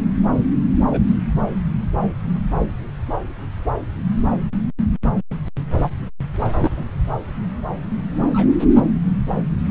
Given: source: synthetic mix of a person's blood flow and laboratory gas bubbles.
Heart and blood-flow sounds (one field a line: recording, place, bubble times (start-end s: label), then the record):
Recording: Doppler ultrasound of blood flow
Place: subclavian vein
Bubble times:
0.90-1.01 s: bubbles
1.07-1.14 s: bubbles
6.54-6.84 s: bubbles
8.29-8.52 s: bubbles
From the record:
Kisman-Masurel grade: 121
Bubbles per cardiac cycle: 1 to 2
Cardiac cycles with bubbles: 10 to 50%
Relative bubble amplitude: barely perceptible (0.100 to 0.250)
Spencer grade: 2 (many but less than half of the cardiac periods contain bubble signals, singularly or in groups)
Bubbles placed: anywhere in the cardiac cycle